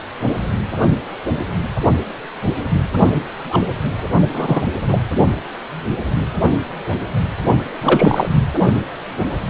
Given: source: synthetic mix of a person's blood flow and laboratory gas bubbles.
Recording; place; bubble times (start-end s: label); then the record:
Doppler ultrasound of blood flow; precordium
3.49-3.65 s: bubbles
4.33-4.63 s: bubbles
4.88-5.01 s: bubbles
7.81-8.29 s: bubbles
From the record:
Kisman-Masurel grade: 223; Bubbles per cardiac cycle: several, 3 to 8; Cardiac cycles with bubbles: 10 to 50%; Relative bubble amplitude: loud (0.450 to 0.775); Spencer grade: 2 (many but less than half of the cardiac periods contain bubble signals, singularly or in groups); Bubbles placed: only in the low amplitude regions of the cardiac cycle